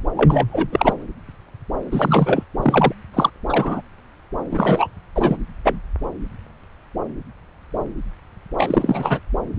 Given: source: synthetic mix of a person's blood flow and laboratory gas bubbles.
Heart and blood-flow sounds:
Doppler ultrasound of blood flow; subclavian vein
0.16-0.46 s: bubbles
0.49-0.95 s: bubbles
1.91-2.44 s: bubbles
2.62-2.93 s: bubbles
3.14-3.30 s: bubbles
3.49-3.82 s: bubbles
4.51-4.90 s: bubbles
5.16-5.37 s: bubbles
5.64-5.79 s: bubbles
8.56-9.20 s: bubbles
From the record:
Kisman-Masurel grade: 223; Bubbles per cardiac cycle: several, 3 to 8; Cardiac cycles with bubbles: 10 to 50%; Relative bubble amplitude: loud (0.450 to 0.775); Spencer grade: 2 (many but less than half of the cardiac periods contain bubble signals, singularly or in groups); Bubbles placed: anywhere in the cardiac cycle

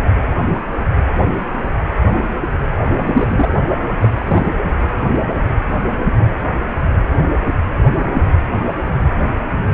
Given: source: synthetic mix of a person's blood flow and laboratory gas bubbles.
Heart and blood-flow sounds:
Doppler ultrasound of blood flow; precordium
2.98-3.58 s: bubbles
4.02-4.09 s: bubbles
4.15-4.53 s: bubbles
From the record:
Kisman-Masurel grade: 222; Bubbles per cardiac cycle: several, 3 to 8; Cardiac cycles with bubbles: 10 to 50%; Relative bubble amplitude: moderate (0.250 to 0.450); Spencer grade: 2 (many but less than half of the cardiac periods contain bubble signals, singularly or in groups); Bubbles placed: anywhere in the cardiac cycle

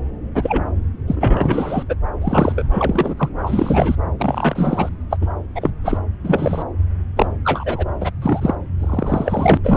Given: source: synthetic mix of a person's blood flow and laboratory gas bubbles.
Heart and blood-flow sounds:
Doppler ultrasound of blood flow; subclavian vein
0.34-0.63 s: bubbles
1.08-1.83 s: bubbles
1.89-1.95 s: bubbles
2.21-2.67 s: bubbles
2.71-3.15 s: bubbles
3.18-3.29 s: bubbles
3.38-3.96 s: bubbles
4.19-4.89 s: bubbles
5.10-5.17 s: bubbles
5.21-5.26 s: bubbles
5.55-5.71 s: bubbles
5.84-5.97 s: bubbles
6.24-6.62 s: bubbles
7.16-7.26 s: bubbles
7.44-7.86 s: bubbles
8.01-8.12 s: bubbles
8.21-8.55 s: bubbles
8.79-9.57 s: bubbles
9.63-9.77 s: bubbles
From the record:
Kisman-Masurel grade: 233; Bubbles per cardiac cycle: several, 3 to 8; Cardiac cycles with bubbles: 50 to 99%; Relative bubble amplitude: loud (0.450 to 0.775); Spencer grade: 3 (all of the cardiac periods contain showers or single bubble signals, but not dominating or overriding the cardiac motion signals); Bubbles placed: anywhere in the cardiac cycle

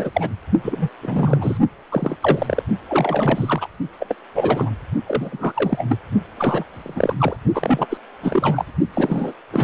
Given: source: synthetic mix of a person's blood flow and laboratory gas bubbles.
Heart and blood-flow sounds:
Doppler ultrasound of blood flow; precordium
0.00-0.10 s: bubbles
0.14-0.29 s: bubbles
0.64-0.89 s: bubbles
1.02-1.57 s: bubbles
1.92-2.17 s: bubbles
2.21-2.65 s: bubbles
2.89-3.69 s: bubbles
4.00-4.06 s: bubbles
4.09-4.15 s: bubbles
4.35-4.70 s: bubbles
5.04-5.52 s: bubbles
5.55-5.85 s: bubbles
5.88-5.98 s: bubbles
6.38-6.64 s: bubbles
6.72-7.15 s: bubbles
7.18-7.36 s: bubbles
7.53-7.87 s: bubbles
7.90-7.97 s: bubbles
8.21-8.65 s: bubbles
8.94-9.33 s: bubbles
9.51-9.64 s: bubbles
From the record:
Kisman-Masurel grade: 342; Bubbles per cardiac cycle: rolling drumbeat, 9 or more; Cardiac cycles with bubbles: 100%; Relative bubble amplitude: moderate (0.250 to 0.450); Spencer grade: 3 (all of the cardiac periods contain showers or single bubble signals, but not dominating or overriding the cardiac motion signals); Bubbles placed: only in the low amplitude regions of the cardiac cycle

